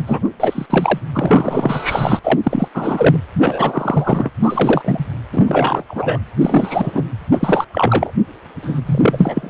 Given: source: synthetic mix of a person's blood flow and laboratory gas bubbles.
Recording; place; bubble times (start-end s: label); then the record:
Doppler ultrasound of blood flow; precordium
0.06-0.28 s: bubbles
0.40-0.66 s: bubbles
0.69-0.99 s: bubbles
1.15-2.19 s: bubbles
2.24-2.40 s: bubbles
2.43-2.68 s: bubbles
2.74-3.16 s: bubbles
3.35-4.30 s: bubbles
4.42-5.05 s: bubbles
5.33-5.83 s: bubbles
5.88-6.19 s: bubbles
6.38-7.04 s: bubbles
7.31-7.64 s: bubbles
7.72-8.12 s: bubbles
8.62-8.81 s: bubbles
8.86-9.50 s: bubbles
From the record:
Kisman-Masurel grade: 343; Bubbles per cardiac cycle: rolling drumbeat, 9 or more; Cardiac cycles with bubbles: 100%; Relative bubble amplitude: loud (0.450 to 0.775); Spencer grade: 3 (all of the cardiac periods contain showers or single bubble signals, but not dominating or overriding the cardiac motion signals); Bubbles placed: anywhere in the cardiac cycle